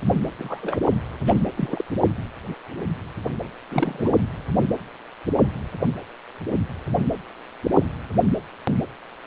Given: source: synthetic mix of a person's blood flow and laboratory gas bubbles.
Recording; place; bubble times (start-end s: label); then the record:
Doppler ultrasound of blood flow; precordium
0.38-0.77 s: bubbles
1.27-1.42 s: bubbles
1.57-1.84 s: bubbles
3.71-4.21 s: bubbles
From the record:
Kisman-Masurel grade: 221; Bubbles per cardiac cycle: several, 3 to 8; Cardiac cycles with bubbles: 10 to 50%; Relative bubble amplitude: barely perceptible (0.100 to 0.250); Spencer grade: 2 (many but less than half of the cardiac periods contain bubble signals, singularly or in groups); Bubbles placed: anywhere in the cardiac cycle